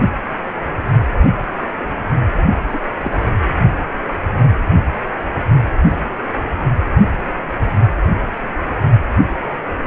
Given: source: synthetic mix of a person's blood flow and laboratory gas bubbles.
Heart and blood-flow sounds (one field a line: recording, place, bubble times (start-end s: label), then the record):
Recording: Doppler ultrasound of blood flow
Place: precordium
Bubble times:
2.73-2.79 s: bubbles
3.01-3.11 s: bubbles
From the record:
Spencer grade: 2 (many but less than half of the cardiac periods contain bubble signals, singularly or in groups)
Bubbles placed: only in the low amplitude regions of the cardiac cycle